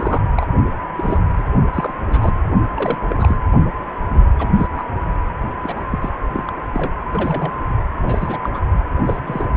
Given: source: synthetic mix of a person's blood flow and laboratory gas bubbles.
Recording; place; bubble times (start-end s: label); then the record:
Doppler ultrasound of blood flow; precordium
0.00-0.22 s: bubbles
0.37-0.46 s: bubbles
0.95-1.19 s: bubbles
1.35-1.43 s: bubbles
1.73-1.94 s: bubbles
2.09-2.34 s: bubbles
2.76-2.98 s: bubbles
3.09-3.36 s: bubbles
4.38-4.49 s: bubbles
4.56-4.67 s: bubbles
4.76-4.84 s: bubbles
5.63-5.83 s: bubbles
5.91-6.09 s: bubbles
6.33-6.43 s: bubbles
6.46-6.53 s: bubbles
6.73-6.93 s: bubbles
7.12-7.52 s: bubbles
8.03-8.39 s: bubbles
8.43-8.50 s: bubbles
8.54-8.60 s: bubbles
9.06-9.20 s: bubbles
9.27-9.46 s: bubbles
From the record:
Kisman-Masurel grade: 242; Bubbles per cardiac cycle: several, 3 to 8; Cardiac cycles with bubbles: 100%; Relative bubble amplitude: moderate (0.250 to 0.450); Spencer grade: 3 (all of the cardiac periods contain showers or single bubble signals, but not dominating or overriding the cardiac motion signals); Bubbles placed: only in the low amplitude regions of the cardiac cycle